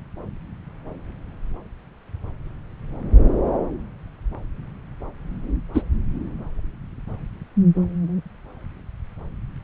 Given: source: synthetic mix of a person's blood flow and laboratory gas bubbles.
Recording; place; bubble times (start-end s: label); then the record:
Doppler ultrasound of blood flow; subclavian vein
5.74-5.82 s: bubbles
From the record:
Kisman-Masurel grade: 113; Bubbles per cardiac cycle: 1 to 2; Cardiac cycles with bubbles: 1 to 10%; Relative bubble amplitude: loud (0.450 to 0.775); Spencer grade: 1 (occasional bubble signal discernible with the cardiac motion signal, with majority of cardiac periods free of bubbles); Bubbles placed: anywhere in the cardiac cycle